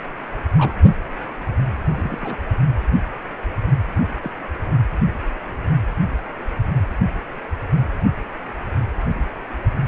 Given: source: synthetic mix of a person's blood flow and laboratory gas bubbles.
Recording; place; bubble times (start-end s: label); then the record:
Doppler ultrasound of blood flow; precordium
0.57-0.74 s: bubbles
1.86-2.37 s: bubbles
4.22-4.32 s: bubbles
From the record:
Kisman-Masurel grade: 121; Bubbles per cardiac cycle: 1 to 2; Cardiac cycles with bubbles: 10 to 50%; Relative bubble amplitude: barely perceptible (0.100 to 0.250); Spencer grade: 2 (many but less than half of the cardiac periods contain bubble signals, singularly or in groups); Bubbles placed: anywhere in the cardiac cycle